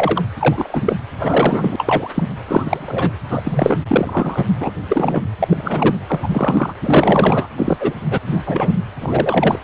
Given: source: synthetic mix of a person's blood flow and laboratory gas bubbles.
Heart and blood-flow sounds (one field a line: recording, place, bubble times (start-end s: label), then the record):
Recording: Doppler ultrasound of blood flow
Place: precordium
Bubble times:
0.00-0.22 s: bubbles
0.39-0.96 s: bubbles
1.19-2.09 s: bubbles
2.15-2.23 s: bubbles
2.48-3.11 s: bubbles
3.29-3.80 s: bubbles
3.88-4.50 s: bubbles
4.60-4.71 s: bubbles
4.88-5.21 s: bubbles
5.39-5.95 s: bubbles
6.08-6.73 s: bubbles
6.82-7.47 s: bubbles
7.57-7.77 s: bubbles
7.79-7.94 s: bubbles
8.11-8.18 s: bubbles
8.26-8.40 s: bubbles
8.46-8.79 s: bubbles
9.01-9.59 s: bubbles
From the record:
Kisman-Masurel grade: 233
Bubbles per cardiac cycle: several, 3 to 8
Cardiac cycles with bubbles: 50 to 99%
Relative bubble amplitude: loud (0.450 to 0.775)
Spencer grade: 3 (all of the cardiac periods contain showers or single bubble signals, but not dominating or overriding the cardiac motion signals)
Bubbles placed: anywhere in the cardiac cycle